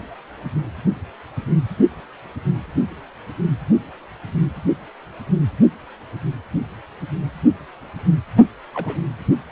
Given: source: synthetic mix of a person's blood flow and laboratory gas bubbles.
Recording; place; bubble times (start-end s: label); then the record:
Doppler ultrasound of blood flow; precordium
8.74-9.00 s: bubbles
From the record:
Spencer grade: 1 (occasional bubble signal discernible with the cardiac motion signal, with majority of cardiac periods free of bubbles); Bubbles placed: anywhere in the cardiac cycle